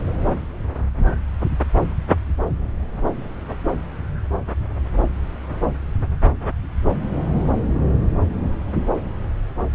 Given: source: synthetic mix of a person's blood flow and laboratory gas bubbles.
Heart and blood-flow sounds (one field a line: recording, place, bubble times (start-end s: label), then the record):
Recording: Doppler ultrasound of blood flow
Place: subclavian vein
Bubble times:
no bubbles
From the record:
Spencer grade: 0 (complete lack of bubble signals)